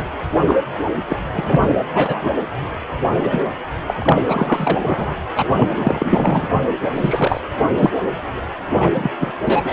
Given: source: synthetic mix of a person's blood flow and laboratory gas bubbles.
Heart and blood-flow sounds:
Doppler ultrasound of blood flow; precordium
0.00-0.03 s: bubbles
0.44-0.61 s: bubbles
1.07-1.17 s: bubbles
1.34-1.57 s: bubbles
1.62-1.77 s: bubbles
1.94-2.35 s: bubbles
3.19-3.44 s: bubbles
3.87-4.22 s: bubbles
4.25-4.78 s: bubbles
4.83-5.16 s: bubbles
5.36-5.50 s: bubbles
5.55-6.49 s: bubbles
6.93-7.41 s: bubbles
7.77-7.90 s: bubbles
8.79-9.10 s: bubbles
9.20-9.32 s: bubbles
9.45-9.73 s: bubbles
From the record:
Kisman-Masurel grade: 243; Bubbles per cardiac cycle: several, 3 to 8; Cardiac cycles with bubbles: 100%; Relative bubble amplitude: loud (0.450 to 0.775); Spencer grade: 3 (all of the cardiac periods contain showers or single bubble signals, but not dominating or overriding the cardiac motion signals); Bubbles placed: anywhere in the cardiac cycle

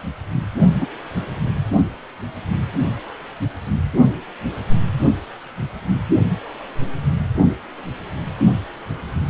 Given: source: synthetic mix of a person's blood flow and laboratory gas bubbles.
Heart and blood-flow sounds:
Doppler ultrasound of blood flow; precordium
0.81-0.88 s: bubbles
From the record:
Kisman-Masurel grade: 112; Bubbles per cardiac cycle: 1 to 2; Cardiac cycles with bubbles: 1 to 10%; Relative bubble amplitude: moderate (0.250 to 0.450); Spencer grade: 1 (occasional bubble signal discernible with the cardiac motion signal, with majority of cardiac periods free of bubbles); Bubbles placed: anywhere in the cardiac cycle

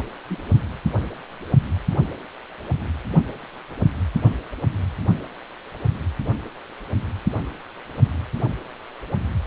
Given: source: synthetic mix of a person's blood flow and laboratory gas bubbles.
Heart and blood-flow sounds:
Doppler ultrasound of blood flow; precordium
0.00-0.02 s: bubbles
0.05-0.07 s: bubbles
0.29-0.42 s: bubbles
From the record:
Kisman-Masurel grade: 111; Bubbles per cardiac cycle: 1 to 2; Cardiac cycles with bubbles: 1 to 10%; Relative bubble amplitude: barely perceptible (0.100 to 0.250); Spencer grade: 1 (occasional bubble signal discernible with the cardiac motion signal, with majority of cardiac periods free of bubbles); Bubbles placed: only in the low amplitude regions of the cardiac cycle

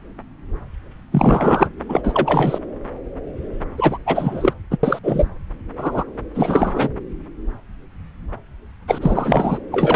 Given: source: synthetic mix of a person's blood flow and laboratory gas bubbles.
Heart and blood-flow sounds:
Doppler ultrasound of blood flow; subclavian vein
1.11-1.70 s: bubbles
1.89-2.58 s: bubbles
3.77-3.98 s: bubbles
4.06-4.54 s: bubbles
4.71-4.77 s: bubbles
4.83-4.99 s: bubbles
5.03-5.28 s: bubbles
5.77-6.04 s: bubbles
6.35-6.89 s: bubbles
8.88-9.59 s: bubbles
9.71-9.96 s: bubbles
From the record:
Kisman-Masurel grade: 333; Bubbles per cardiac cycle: rolling drumbeat, 9 or more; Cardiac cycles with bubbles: 50 to 99%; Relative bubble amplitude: loud (0.450 to 0.775); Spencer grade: 3 (all of the cardiac periods contain showers or single bubble signals, but not dominating or overriding the cardiac motion signals); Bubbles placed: anywhere in the cardiac cycle

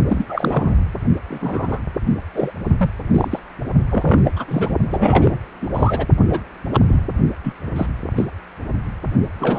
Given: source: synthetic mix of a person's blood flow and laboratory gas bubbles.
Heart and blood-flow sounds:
Doppler ultrasound of blood flow; precordium
0.08-0.26 s: bubbles
0.29-0.76 s: bubbles
1.28-1.79 s: bubbles
2.34-2.52 s: bubbles
2.77-2.90 s: bubbles
3.10-3.40 s: bubbles
3.91-4.31 s: bubbles
4.36-4.45 s: bubbles
4.47-4.76 s: bubbles
4.89-5.38 s: bubbles
5.61-5.68 s: bubbles
5.75-6.06 s: bubbles
6.29-6.41 s: bubbles
6.73-6.79 s: bubbles
6.88-7.08 s: bubbles
7.43-7.54 s: bubbles
7.76-7.86 s: bubbles
8.16-8.27 s: bubbles
9.40-9.59 s: bubbles
From the record:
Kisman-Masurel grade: 242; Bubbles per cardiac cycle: several, 3 to 8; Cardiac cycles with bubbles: 100%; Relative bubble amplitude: moderate (0.250 to 0.450); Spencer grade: 3 (all of the cardiac periods contain showers or single bubble signals, but not dominating or overriding the cardiac motion signals); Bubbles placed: only in the low amplitude regions of the cardiac cycle

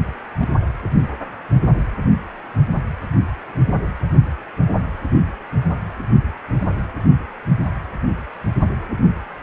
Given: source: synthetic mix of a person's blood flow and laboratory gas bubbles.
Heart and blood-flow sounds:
Doppler ultrasound of blood flow; precordium
0.24-0.34 s: bubbles
0.40-0.47 s: bubbles
0.49-0.53 s: bubbles
From the record:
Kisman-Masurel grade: 111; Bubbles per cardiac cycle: 1 to 2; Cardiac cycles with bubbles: 1 to 10%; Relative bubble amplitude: barely perceptible (0.100 to 0.250); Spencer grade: 1 (occasional bubble signal discernible with the cardiac motion signal, with majority of cardiac periods free of bubbles); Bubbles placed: anywhere in the cardiac cycle

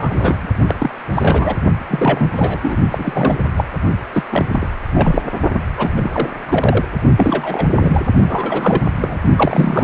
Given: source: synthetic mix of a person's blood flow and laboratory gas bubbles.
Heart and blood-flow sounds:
Doppler ultrasound of blood flow; precordium
0.00-0.48 s: bubbles
0.67-0.76 s: bubbles
0.78-0.90 s: bubbles
1.13-1.56 s: bubbles
1.83-2.29 s: bubbles
2.35-2.60 s: bubbles
2.62-2.77 s: bubbles
2.91-3.44 s: bubbles
3.56-3.64 s: bubbles
4.12-4.23 s: bubbles
4.29-4.46 s: bubbles
4.51-4.67 s: bubbles
4.94-5.22 s: bubbles
5.53-5.60 s: bubbles
5.78-5.91 s: bubbles
5.96-6.29 s: bubbles
6.46-6.86 s: bubbles
7.16-8.05 s: bubbles
8.26-8.82 s: bubbles
9.01-9.18 s: bubbles
9.35-9.84 s: bubbles
From the record:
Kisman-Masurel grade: 342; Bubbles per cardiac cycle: rolling drumbeat, 9 or more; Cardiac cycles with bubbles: 100%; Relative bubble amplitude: moderate (0.250 to 0.450); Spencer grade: 3 (all of the cardiac periods contain showers or single bubble signals, but not dominating or overriding the cardiac motion signals); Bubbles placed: only in the low amplitude regions of the cardiac cycle

